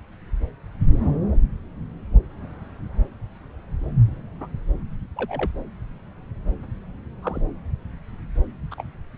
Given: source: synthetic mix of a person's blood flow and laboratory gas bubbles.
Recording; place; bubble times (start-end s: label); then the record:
Doppler ultrasound of blood flow; subclavian vein
0.88-1.18 s: bubbles
4.40-4.47 s: bubbles
5.16-5.50 s: bubbles
7.22-7.41 s: bubbles
8.71-8.75 s: bubbles
8.77-8.83 s: bubbles
From the record:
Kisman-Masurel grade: 121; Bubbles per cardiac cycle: 1 to 2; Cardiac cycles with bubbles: 10 to 50%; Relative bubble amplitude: barely perceptible (0.100 to 0.250); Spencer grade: 2 (many but less than half of the cardiac periods contain bubble signals, singularly or in groups); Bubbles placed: anywhere in the cardiac cycle